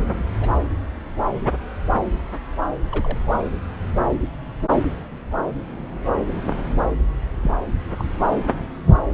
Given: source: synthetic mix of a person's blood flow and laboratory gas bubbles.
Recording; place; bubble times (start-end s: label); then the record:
Doppler ultrasound of blood flow; subclavian vein
0.04-0.24 s: bubbles
0.40-0.50 s: bubbles
2.91-3.18 s: bubbles
7.41-7.52 s: bubbles
7.98-8.04 s: bubbles
From the record:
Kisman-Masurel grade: 121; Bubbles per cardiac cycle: 1 to 2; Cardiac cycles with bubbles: 10 to 50%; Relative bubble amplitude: barely perceptible (0.100 to 0.250); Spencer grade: 2 (many but less than half of the cardiac periods contain bubble signals, singularly or in groups); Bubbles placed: anywhere in the cardiac cycle